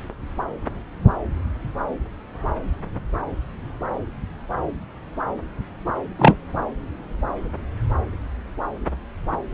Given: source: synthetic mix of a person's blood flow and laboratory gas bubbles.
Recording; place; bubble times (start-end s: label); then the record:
Doppler ultrasound of blood flow; subclavian vein
6.18-6.34 s: bubbles
From the record:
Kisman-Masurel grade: 113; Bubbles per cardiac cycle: 1 to 2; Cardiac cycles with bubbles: 1 to 10%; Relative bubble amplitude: loud (0.450 to 0.775); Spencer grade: 1 (occasional bubble signal discernible with the cardiac motion signal, with majority of cardiac periods free of bubbles); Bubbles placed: anywhere in the cardiac cycle